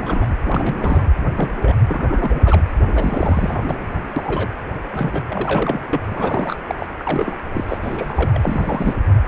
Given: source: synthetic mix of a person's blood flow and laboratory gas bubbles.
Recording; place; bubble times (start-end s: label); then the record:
Doppler ultrasound of blood flow; precordium
0.00-0.36 s: bubbles
0.42-1.06 s: bubbles
1.35-1.75 s: bubbles
1.88-2.63 s: bubbles
2.94-3.65 s: bubbles
3.67-3.76 s: bubbles
4.16-4.48 s: bubbles
4.92-5.26 s: bubbles
5.29-5.80 s: bubbles
5.93-6.02 s: bubbles
6.05-6.56 s: bubbles
6.66-6.75 s: bubbles
6.79-6.87 s: bubbles
6.99-7.36 s: bubbles
7.54-7.64 s: bubbles
7.68-7.78 s: bubbles
7.81-8.94 s: bubbles
From the record:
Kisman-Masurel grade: 232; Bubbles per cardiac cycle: several, 3 to 8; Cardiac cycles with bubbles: 50 to 99%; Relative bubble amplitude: moderate (0.250 to 0.450); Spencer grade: 3 (all of the cardiac periods contain showers or single bubble signals, but not dominating or overriding the cardiac motion signals); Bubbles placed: anywhere in the cardiac cycle